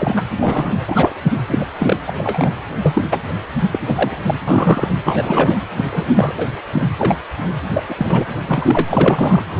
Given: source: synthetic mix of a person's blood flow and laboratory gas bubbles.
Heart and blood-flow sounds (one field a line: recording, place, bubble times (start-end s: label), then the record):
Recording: Doppler ultrasound of blood flow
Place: precordium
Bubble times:
0.00-0.24 s: bubbles
0.39-0.79 s: bubbles
0.88-1.13 s: bubbles
1.24-1.31 s: bubbles
1.48-1.66 s: bubbles
1.79-1.96 s: bubbles
2.06-2.12 s: bubbles
2.18-2.52 s: bubbles
2.82-3.02 s: bubbles
3.11-3.23 s: bubbles
3.72-3.79 s: bubbles
3.88-4.15 s: bubbles
4.27-4.40 s: bubbles
4.47-4.88 s: bubbles
5.05-5.59 s: bubbles
5.75-5.85 s: bubbles
5.92-6.33 s: bubbles
6.38-6.48 s: bubbles
6.71-6.86 s: bubbles
6.98-7.17 s: bubbles
7.73-7.83 s: bubbles
7.88-8.24 s: bubbles
8.46-9.43 s: bubbles
9.58-9.60 s: bubbles
From the record:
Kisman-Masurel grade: 243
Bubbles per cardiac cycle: several, 3 to 8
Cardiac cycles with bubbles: 100%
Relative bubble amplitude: loud (0.450 to 0.775)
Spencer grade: 3 (all of the cardiac periods contain showers or single bubble signals, but not dominating or overriding the cardiac motion signals)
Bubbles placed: anywhere in the cardiac cycle